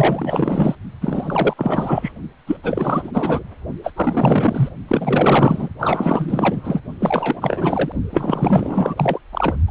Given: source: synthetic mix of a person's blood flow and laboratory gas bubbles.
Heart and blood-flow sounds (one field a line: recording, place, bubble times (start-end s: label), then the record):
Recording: Doppler ultrasound of blood flow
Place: precordium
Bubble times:
0.00-0.75 s: bubbles
1.01-1.53 s: bubbles
1.56-2.12 s: bubbles
2.46-2.57 s: bubbles
2.63-3.43 s: bubbles
3.83-3.93 s: bubbles
3.95-4.69 s: bubbles
4.88-5.69 s: bubbles
5.79-6.81 s: bubbles
7.00-7.92 s: bubbles
8.10-9.19 s: bubbles
9.32-9.56 s: bubbles
9.67-9.70 s: bubbles
From the record:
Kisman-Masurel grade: 444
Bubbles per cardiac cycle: continuous sound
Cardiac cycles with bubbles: 100%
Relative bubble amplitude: maximal (0.775 to 0.999)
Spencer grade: 4 (maximum detectable bubble signal sounding continuously throughout systole and diastole of every cardiac period, and overriding the amplitude of the normal cardiac signals)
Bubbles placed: only in the low amplitude regions of the cardiac cycle